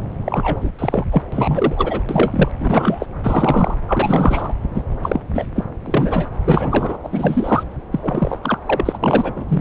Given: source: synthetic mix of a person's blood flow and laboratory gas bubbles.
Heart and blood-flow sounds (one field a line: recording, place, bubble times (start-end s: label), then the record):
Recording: Doppler ultrasound of blood flow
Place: subclavian vein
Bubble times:
0.25-0.70 s: bubbles
0.79-1.04 s: bubbles
1.11-1.22 s: bubbles
1.32-2.01 s: bubbles
2.08-2.52 s: bubbles
2.59-3.06 s: bubbles
3.24-3.75 s: bubbles
3.88-4.54 s: bubbles
4.74-4.83 s: bubbles
5.02-5.21 s: bubbles
5.34-5.45 s: bubbles
5.55-5.65 s: bubbles
5.86-6.29 s: bubbles
6.33-6.98 s: bubbles
7.03-7.09 s: bubbles
7.12-7.63 s: bubbles
7.92-8.38 s: bubbles
8.43-8.58 s: bubbles
8.65-8.98 s: bubbles
9.03-9.45 s: bubbles
9.48-9.61 s: bubbles
From the record:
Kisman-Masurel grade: 343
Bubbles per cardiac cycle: rolling drumbeat, 9 or more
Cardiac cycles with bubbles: 100%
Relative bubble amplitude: loud (0.450 to 0.775)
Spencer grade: 3 (all of the cardiac periods contain showers or single bubble signals, but not dominating or overriding the cardiac motion signals)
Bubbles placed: anywhere in the cardiac cycle